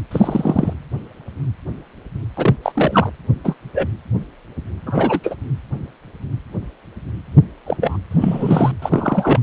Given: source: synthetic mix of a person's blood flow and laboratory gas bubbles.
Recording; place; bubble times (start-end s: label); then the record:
Doppler ultrasound of blood flow; precordium
0.11-0.73 s: bubbles
2.36-2.56 s: bubbles
2.63-2.72 s: bubbles
2.75-3.11 s: bubbles
3.44-3.54 s: bubbles
3.74-3.87 s: bubbles
4.87-5.20 s: bubbles
5.23-5.35 s: bubbles
7.66-7.77 s: bubbles
7.81-7.97 s: bubbles
8.11-8.71 s: bubbles
8.82-9.39 s: bubbles
From the record:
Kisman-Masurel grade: 223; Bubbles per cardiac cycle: several, 3 to 8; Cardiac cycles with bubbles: 10 to 50%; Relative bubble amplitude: loud (0.450 to 0.775); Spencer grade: 2 (many but less than half of the cardiac periods contain bubble signals, singularly or in groups); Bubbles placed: anywhere in the cardiac cycle